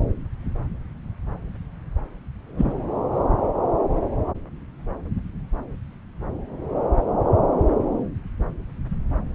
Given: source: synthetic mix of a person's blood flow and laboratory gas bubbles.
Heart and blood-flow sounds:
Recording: Doppler ultrasound of blood flow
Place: subclavian vein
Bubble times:
2.58-2.72 s: bubbles
From the record:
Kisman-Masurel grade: 113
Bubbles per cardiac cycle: 1 to 2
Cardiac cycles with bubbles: 1 to 10%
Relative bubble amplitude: loud (0.450 to 0.775)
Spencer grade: 1 (occasional bubble signal discernible with the cardiac motion signal, with majority of cardiac periods free of bubbles)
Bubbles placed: anywhere in the cardiac cycle

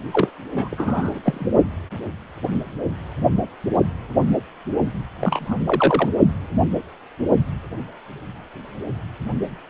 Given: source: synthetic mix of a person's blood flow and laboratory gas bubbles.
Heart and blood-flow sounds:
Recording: Doppler ultrasound of blood flow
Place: precordium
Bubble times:
0.12-0.29 s: bubbles
0.53-1.20 s: bubbles
1.23-1.48 s: bubbles
5.21-5.55 s: bubbles
5.64-6.10 s: bubbles
From the record:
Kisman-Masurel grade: 222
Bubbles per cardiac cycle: several, 3 to 8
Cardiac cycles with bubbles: 10 to 50%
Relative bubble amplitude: moderate (0.250 to 0.450)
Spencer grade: 2 (many but less than half of the cardiac periods contain bubble signals, singularly or in groups)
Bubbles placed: only in the low amplitude regions of the cardiac cycle

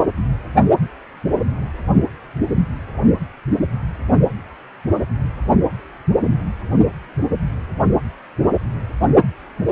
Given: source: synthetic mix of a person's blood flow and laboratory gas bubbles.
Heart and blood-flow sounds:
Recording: Doppler ultrasound of blood flow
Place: precordium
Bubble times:
no bubbles
From the record:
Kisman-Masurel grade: 000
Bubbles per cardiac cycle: 0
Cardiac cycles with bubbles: 0%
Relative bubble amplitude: no bubbles discernible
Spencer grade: 0 (complete lack of bubble signals)

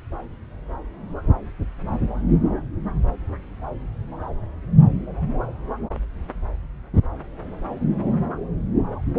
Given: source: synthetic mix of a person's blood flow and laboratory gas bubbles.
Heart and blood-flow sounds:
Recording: Doppler ultrasound of blood flow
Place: subclavian vein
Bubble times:
no bubbles
From the record:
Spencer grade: 0 (complete lack of bubble signals)

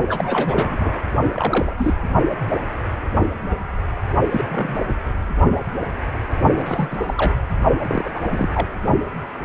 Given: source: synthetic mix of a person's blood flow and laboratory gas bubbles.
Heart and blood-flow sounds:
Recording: Doppler ultrasound of blood flow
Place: precordium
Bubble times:
0.08-1.02 s: bubbles
1.33-1.76 s: bubbles
1.79-1.94 s: bubbles
4.31-4.48 s: bubbles
4.50-4.76 s: bubbles
6.54-6.96 s: bubbles
7.00-7.34 s: bubbles
7.82-8.11 s: bubbles
8.14-8.20 s: bubbles
8.30-8.49 s: bubbles
8.54-8.67 s: bubbles
From the record:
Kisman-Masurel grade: 232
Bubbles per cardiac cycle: several, 3 to 8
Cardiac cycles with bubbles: 50 to 99%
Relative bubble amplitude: moderate (0.250 to 0.450)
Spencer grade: 3 (all of the cardiac periods contain showers or single bubble signals, but not dominating or overriding the cardiac motion signals)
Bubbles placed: only in the low amplitude regions of the cardiac cycle

